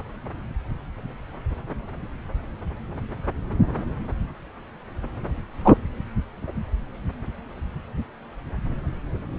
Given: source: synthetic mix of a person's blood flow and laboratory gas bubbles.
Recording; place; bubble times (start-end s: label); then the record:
Doppler ultrasound of blood flow; subclavian vein
5.63-5.77 s: bubbles
From the record:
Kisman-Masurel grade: 113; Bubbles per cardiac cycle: 1 to 2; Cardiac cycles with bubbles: 1 to 10%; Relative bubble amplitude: loud (0.450 to 0.775); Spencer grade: 1 (occasional bubble signal discernible with the cardiac motion signal, with majority of cardiac periods free of bubbles); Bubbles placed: anywhere in the cardiac cycle